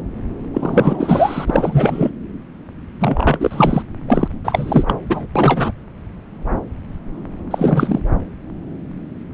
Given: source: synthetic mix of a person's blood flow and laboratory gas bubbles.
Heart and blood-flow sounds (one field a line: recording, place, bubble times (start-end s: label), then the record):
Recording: Doppler ultrasound of blood flow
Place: subclavian vein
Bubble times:
0.54-2.10 s: bubbles
3.00-3.83 s: bubbles
4.08-4.28 s: bubbles
4.44-4.84 s: bubbles
4.87-4.93 s: bubbles
5.09-5.26 s: bubbles
5.35-5.72 s: bubbles
7.50-7.99 s: bubbles
From the record:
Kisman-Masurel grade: 333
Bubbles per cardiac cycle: rolling drumbeat, 9 or more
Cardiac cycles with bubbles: 50 to 99%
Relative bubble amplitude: loud (0.450 to 0.775)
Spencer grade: 3 (all of the cardiac periods contain showers or single bubble signals, but not dominating or overriding the cardiac motion signals)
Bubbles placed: anywhere in the cardiac cycle